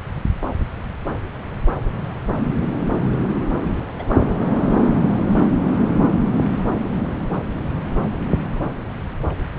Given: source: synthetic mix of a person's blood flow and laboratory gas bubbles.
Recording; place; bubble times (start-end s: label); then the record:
Doppler ultrasound of blood flow; subclavian vein
3.99-4.03 s: bubbles
4.08-4.16 s: bubbles
From the record:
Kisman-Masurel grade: 111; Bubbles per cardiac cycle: 1 to 2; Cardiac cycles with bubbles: 1 to 10%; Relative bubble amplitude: barely perceptible (0.100 to 0.250); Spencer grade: 1 (occasional bubble signal discernible with the cardiac motion signal, with majority of cardiac periods free of bubbles); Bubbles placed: anywhere in the cardiac cycle